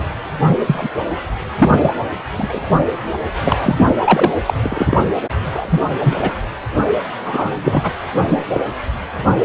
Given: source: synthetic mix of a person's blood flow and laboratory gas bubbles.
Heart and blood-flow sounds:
Doppler ultrasound of blood flow; precordium
0.00-0.02 s: bubbles
0.42-0.59 s: bubbles
0.66-0.89 s: bubbles
1.58-1.91 s: bubbles
2.38-2.59 s: bubbles
3.45-3.58 s: bubbles
3.60-3.94 s: bubbles
4.04-4.32 s: bubbles
4.46-4.54 s: bubbles
4.63-4.97 s: bubbles
5.51-5.82 s: bubbles
6.03-6.16 s: bubbles
6.21-6.32 s: bubbles
7.25-7.51 s: bubbles
7.63-7.92 s: bubbles
8.28-8.46 s: bubbles
8.53-8.67 s: bubbles
From the record:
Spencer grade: 3 (all of the cardiac periods contain showers or single bubble signals, but not dominating or overriding the cardiac motion signals); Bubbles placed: anywhere in the cardiac cycle

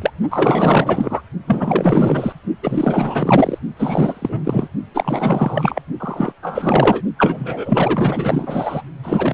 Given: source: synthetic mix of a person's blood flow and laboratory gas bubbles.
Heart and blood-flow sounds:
Doppler ultrasound of blood flow; precordium
0.02-0.11 s: bubbles
0.30-1.22 s: bubbles
1.47-2.33 s: bubbles
2.62-3.59 s: bubbles
3.77-4.68 s: bubbles
4.94-5.80 s: bubbles
5.99-6.33 s: bubbles
6.43-7.02 s: bubbles
7.18-8.82 s: bubbles
9.04-9.34 s: bubbles
From the record:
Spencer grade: 4 (maximum detectable bubble signal sounding continuously throughout systole and diastole of every cardiac period, and overriding the amplitude of the normal cardiac signals); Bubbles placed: only in the low amplitude regions of the cardiac cycle

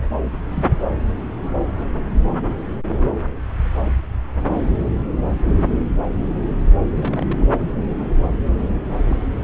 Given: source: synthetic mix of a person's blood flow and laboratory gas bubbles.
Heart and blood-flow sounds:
Doppler ultrasound of blood flow; subclavian vein
0.51-0.65 s: bubbles
6.95-7.46 s: bubbles
8.59-8.80 s: bubbles
9.04-9.16 s: bubbles
From the record:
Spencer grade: 2 (many but less than half of the cardiac periods contain bubble signals, singularly or in groups); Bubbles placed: anywhere in the cardiac cycle

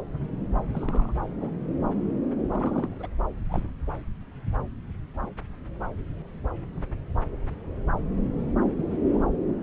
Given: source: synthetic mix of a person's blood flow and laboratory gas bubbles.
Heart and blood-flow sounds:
Doppler ultrasound of blood flow; subclavian vein
0.75-1.12 s: bubbles
1.41-1.49 s: bubbles
2.54-2.87 s: bubbles
2.92-3.07 s: bubbles
3.50-3.69 s: bubbles
8.60-8.65 s: bubbles
8.68-8.82 s: bubbles
8.91-8.96 s: bubbles
9.09-9.23 s: bubbles
From the record:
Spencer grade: 2 (many but less than half of the cardiac periods contain bubble signals, singularly or in groups); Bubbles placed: anywhere in the cardiac cycle

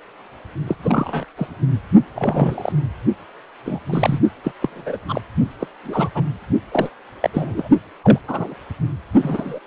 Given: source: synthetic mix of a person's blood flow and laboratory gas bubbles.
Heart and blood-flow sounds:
Doppler ultrasound of blood flow; precordium
0.67-0.76 s: bubbles
0.81-1.25 s: bubbles
1.38-1.48 s: bubbles
2.15-2.72 s: bubbles
3.65-3.79 s: bubbles
3.86-4.19 s: bubbles
4.43-4.51 s: bubbles
4.60-4.97 s: bubbles
5.08-5.21 s: bubbles
5.60-5.67 s: bubbles
5.84-6.09 s: bubbles
6.14-6.24 s: bubbles
6.71-6.90 s: bubbles
7.21-7.29 s: bubbles
7.33-7.68 s: bubbles
8.02-8.19 s: bubbles
8.28-8.54 s: bubbles
9.22-9.59 s: bubbles
From the record:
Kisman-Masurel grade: 232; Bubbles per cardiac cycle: several, 3 to 8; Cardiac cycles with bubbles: 50 to 99%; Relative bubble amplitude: moderate (0.250 to 0.450); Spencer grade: 3 (all of the cardiac periods contain showers or single bubble signals, but not dominating or overriding the cardiac motion signals); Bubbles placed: only in the low amplitude regions of the cardiac cycle

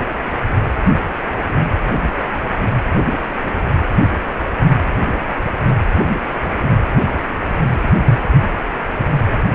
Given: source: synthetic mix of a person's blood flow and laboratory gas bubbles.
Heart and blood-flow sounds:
Doppler ultrasound of blood flow; precordium
7.06-7.12 s: bubbles
From the record:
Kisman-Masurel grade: 123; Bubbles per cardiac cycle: 1 to 2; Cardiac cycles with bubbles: 10 to 50%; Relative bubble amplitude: loud (0.450 to 0.775); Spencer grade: 2 (many but less than half of the cardiac periods contain bubble signals, singularly or in groups); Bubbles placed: anywhere in the cardiac cycle

